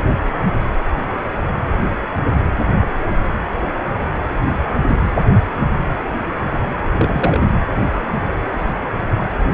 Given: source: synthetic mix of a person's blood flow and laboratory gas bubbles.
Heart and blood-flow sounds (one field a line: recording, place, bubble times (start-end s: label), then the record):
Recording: Doppler ultrasound of blood flow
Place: precordium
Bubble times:
6.97-7.50 s: bubbles
From the record:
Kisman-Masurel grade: 112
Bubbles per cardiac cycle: 1 to 2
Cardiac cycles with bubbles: 1 to 10%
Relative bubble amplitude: moderate (0.250 to 0.450)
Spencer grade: 1 (occasional bubble signal discernible with the cardiac motion signal, with majority of cardiac periods free of bubbles)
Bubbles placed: anywhere in the cardiac cycle